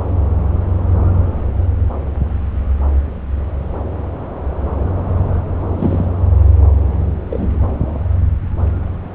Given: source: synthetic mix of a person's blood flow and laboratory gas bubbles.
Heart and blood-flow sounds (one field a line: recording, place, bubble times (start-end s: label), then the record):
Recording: Doppler ultrasound of blood flow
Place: subclavian vein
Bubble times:
5.79-6.05 s: bubbles
7.30-7.47 s: bubbles
From the record:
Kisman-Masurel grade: 113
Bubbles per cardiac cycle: 1 to 2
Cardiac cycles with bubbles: 1 to 10%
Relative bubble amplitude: loud (0.450 to 0.775)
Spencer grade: 1 (occasional bubble signal discernible with the cardiac motion signal, with majority of cardiac periods free of bubbles)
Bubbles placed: anywhere in the cardiac cycle